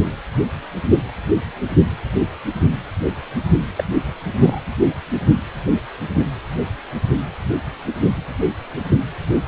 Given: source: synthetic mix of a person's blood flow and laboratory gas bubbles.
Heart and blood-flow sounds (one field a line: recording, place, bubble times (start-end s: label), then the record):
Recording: Doppler ultrasound of blood flow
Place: precordium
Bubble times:
3.77-3.84 s: bubbles
4.40-4.60 s: bubbles
From the record:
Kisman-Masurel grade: 112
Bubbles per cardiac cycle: 1 to 2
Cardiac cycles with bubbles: 1 to 10%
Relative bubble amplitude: moderate (0.250 to 0.450)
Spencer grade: 1 (occasional bubble signal discernible with the cardiac motion signal, with majority of cardiac periods free of bubbles)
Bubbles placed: anywhere in the cardiac cycle